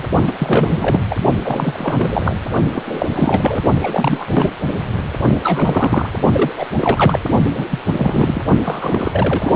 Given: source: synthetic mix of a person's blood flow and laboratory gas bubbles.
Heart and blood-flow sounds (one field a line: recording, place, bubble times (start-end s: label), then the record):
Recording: Doppler ultrasound of blood flow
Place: precordium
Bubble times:
0.27-0.34 s: bubbles
0.38-0.99 s: bubbles
1.10-1.15 s: bubbles
1.44-2.37 s: bubbles
2.73-2.83 s: bubbles
2.86-3.62 s: bubbles
3.81-4.27 s: bubbles
4.33-4.52 s: bubbles
5.43-6.09 s: bubbles
6.32-6.53 s: bubbles
6.56-6.67 s: bubbles
6.77-7.19 s: bubbles
7.53-7.64 s: bubbles
7.71-7.79 s: bubbles
7.85-8.42 s: bubbles
8.64-9.54 s: bubbles
From the record:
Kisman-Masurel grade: 342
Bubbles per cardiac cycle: rolling drumbeat, 9 or more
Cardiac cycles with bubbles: 100%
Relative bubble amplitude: moderate (0.250 to 0.450)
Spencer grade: 3 (all of the cardiac periods contain showers or single bubble signals, but not dominating or overriding the cardiac motion signals)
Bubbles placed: only in the low amplitude regions of the cardiac cycle